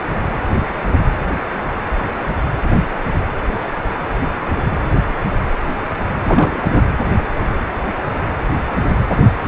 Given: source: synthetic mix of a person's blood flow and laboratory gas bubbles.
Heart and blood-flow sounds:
Doppler ultrasound of blood flow; precordium
6.25-6.83 s: bubbles
From the record:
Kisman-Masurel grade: 212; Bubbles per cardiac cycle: several, 3 to 8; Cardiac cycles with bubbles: 1 to 10%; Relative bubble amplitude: moderate (0.250 to 0.450); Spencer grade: 1 (occasional bubble signal discernible with the cardiac motion signal, with majority of cardiac periods free of bubbles); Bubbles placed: anywhere in the cardiac cycle

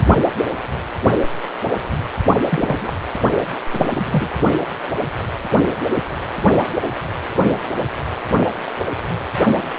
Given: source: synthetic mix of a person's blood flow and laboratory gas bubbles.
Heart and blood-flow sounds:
Doppler ultrasound of blood flow; precordium
2.51-2.94 s: bubbles
3.73-3.86 s: bubbles
3.89-4.29 s: bubbles
From the record:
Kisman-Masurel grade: 222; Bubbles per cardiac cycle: several, 3 to 8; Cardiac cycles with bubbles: 10 to 50%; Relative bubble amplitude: moderate (0.250 to 0.450); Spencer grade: 2 (many but less than half of the cardiac periods contain bubble signals, singularly or in groups); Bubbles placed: only in the low amplitude regions of the cardiac cycle

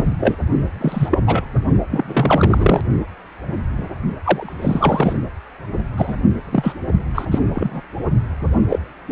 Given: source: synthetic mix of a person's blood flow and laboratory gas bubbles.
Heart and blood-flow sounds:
Doppler ultrasound of blood flow; precordium
0.00-0.06 s: bubbles
0.20-0.35 s: bubbles
0.80-1.20 s: bubbles
1.27-1.44 s: bubbles
1.90-2.81 s: bubbles
4.22-4.53 s: bubbles
4.61-5.18 s: bubbles
5.96-6.16 s: bubbles
6.51-6.76 s: bubbles
7.14-7.25 s: bubbles
7.31-7.38 s: bubbles
7.54-7.81 s: bubbles
8.70-8.79 s: bubbles
From the record:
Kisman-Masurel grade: 233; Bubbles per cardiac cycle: several, 3 to 8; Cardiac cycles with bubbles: 50 to 99%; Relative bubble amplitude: loud (0.450 to 0.775); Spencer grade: 3 (all of the cardiac periods contain showers or single bubble signals, but not dominating or overriding the cardiac motion signals); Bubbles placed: only in the low amplitude regions of the cardiac cycle

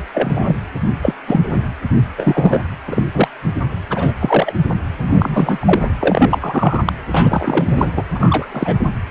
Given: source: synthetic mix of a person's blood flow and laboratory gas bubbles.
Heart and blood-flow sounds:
Doppler ultrasound of blood flow; precordium
0.14-0.56 s: bubbles
1.02-1.14 s: bubbles
1.27-1.64 s: bubbles
2.17-2.62 s: bubbles
2.87-3.02 s: bubbles
3.14-3.28 s: bubbles
3.90-4.14 s: bubbles
4.19-4.54 s: bubbles
5.00-5.89 s: bubbles
6.00-6.38 s: bubbles
6.41-6.82 s: bubbles
6.85-6.93 s: bubbles
7.12-7.90 s: bubbles
7.96-8.03 s: bubbles
8.15-8.46 s: bubbles
8.52-8.79 s: bubbles
From the record:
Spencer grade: 3 (all of the cardiac periods contain showers or single bubble signals, but not dominating or overriding the cardiac motion signals); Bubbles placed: anywhere in the cardiac cycle

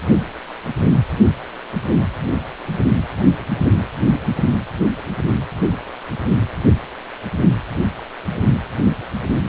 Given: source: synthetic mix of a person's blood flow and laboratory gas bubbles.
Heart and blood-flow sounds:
Doppler ultrasound of blood flow; precordium
no bubbles
From the record:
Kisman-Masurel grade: 000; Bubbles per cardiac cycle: 0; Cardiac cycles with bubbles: 0%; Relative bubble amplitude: no bubbles discernible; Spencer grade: 0 (complete lack of bubble signals)

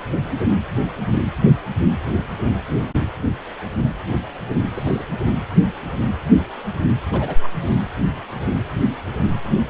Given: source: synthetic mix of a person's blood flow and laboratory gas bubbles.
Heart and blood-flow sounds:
Doppler ultrasound of blood flow; precordium
4.74-5.05 s: bubbles
7.12-7.35 s: bubbles
7.43-7.49 s: bubbles
From the record:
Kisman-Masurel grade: 122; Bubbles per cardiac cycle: 1 to 2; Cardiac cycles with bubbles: 10 to 50%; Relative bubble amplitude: moderate (0.250 to 0.450); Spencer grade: 2 (many but less than half of the cardiac periods contain bubble signals, singularly or in groups); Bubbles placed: anywhere in the cardiac cycle

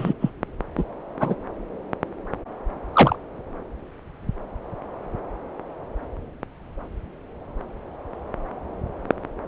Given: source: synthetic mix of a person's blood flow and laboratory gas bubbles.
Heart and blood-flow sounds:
Doppler ultrasound of blood flow; subclavian vein
0.00-0.13 s: bubbles
0.21-0.30 s: bubbles
0.77-0.83 s: bubbles
1.20-1.35 s: bubbles
2.93-3.16 s: bubbles
From the record:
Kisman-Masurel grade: 123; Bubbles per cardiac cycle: 1 to 2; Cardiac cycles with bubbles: 10 to 50%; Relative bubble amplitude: loud (0.450 to 0.775); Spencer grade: 2 (many but less than half of the cardiac periods contain bubble signals, singularly or in groups); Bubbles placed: anywhere in the cardiac cycle

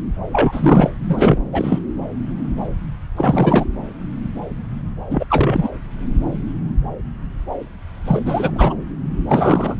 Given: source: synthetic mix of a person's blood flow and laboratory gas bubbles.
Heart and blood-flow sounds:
Doppler ultrasound of blood flow; subclavian vein
0.32-0.90 s: bubbles
1.08-1.39 s: bubbles
1.51-1.79 s: bubbles
3.16-3.67 s: bubbles
5.11-5.26 s: bubbles
5.29-5.69 s: bubbles
8.07-8.22 s: bubbles
8.25-8.75 s: bubbles
9.29-9.76 s: bubbles
From the record:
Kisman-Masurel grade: 333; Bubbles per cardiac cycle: rolling drumbeat, 9 or more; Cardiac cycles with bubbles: 50 to 99%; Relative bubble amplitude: loud (0.450 to 0.775); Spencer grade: 3 (all of the cardiac periods contain showers or single bubble signals, but not dominating or overriding the cardiac motion signals); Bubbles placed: anywhere in the cardiac cycle

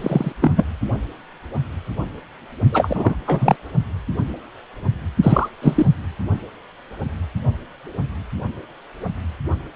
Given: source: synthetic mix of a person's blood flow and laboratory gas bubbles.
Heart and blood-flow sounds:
Doppler ultrasound of blood flow; precordium
0.01-0.33 s: bubbles
0.41-0.65 s: bubbles
2.71-3.15 s: bubbles
3.25-3.56 s: bubbles
5.23-5.49 s: bubbles
5.62-5.93 s: bubbles
From the record:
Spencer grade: 2 (many but less than half of the cardiac periods contain bubble signals, singularly or in groups); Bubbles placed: only in the low amplitude regions of the cardiac cycle

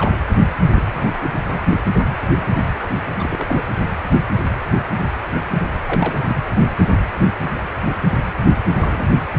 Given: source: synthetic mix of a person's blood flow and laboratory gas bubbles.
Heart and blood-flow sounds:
Doppler ultrasound of blood flow; precordium
0.00-0.11 s: bubbles
0.76-0.83 s: bubbles
0.86-1.30 s: bubbles
1.49-1.60 s: bubbles
3.10-3.15 s: bubbles
3.19-3.61 s: bubbles
5.80-6.20 s: bubbles
6.24-6.35 s: bubbles
8.70-9.17 s: bubbles
From the record:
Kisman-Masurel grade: 221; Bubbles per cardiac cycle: several, 3 to 8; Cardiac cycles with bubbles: 10 to 50%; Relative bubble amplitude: barely perceptible (0.100 to 0.250); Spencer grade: 2 (many but less than half of the cardiac periods contain bubble signals, singularly or in groups); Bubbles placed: anywhere in the cardiac cycle

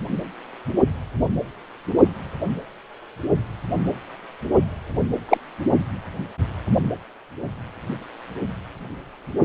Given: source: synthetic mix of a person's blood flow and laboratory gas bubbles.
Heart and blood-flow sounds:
Doppler ultrasound of blood flow; precordium
5.29-5.38 s: bubbles
From the record:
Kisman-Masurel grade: 113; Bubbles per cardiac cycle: 1 to 2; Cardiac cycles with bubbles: 1 to 10%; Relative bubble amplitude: loud (0.450 to 0.775); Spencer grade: 1 (occasional bubble signal discernible with the cardiac motion signal, with majority of cardiac periods free of bubbles); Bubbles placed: anywhere in the cardiac cycle

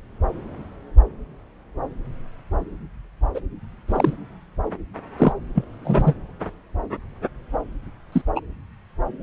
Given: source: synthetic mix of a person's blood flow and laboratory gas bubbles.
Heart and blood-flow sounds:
Doppler ultrasound of blood flow; subclavian vein
3.35-3.41 s: bubbles
3.88-4.13 s: bubbles
5.18-5.32 s: bubbles
5.54-5.64 s: bubbles
5.84-6.13 s: bubbles
8.12-8.21 s: bubbles
8.36-8.40 s: bubbles
From the record:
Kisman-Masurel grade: 123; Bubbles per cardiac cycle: 1 to 2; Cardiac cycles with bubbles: 10 to 50%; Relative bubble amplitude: loud (0.450 to 0.775); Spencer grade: 2 (many but less than half of the cardiac periods contain bubble signals, singularly or in groups); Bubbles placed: anywhere in the cardiac cycle

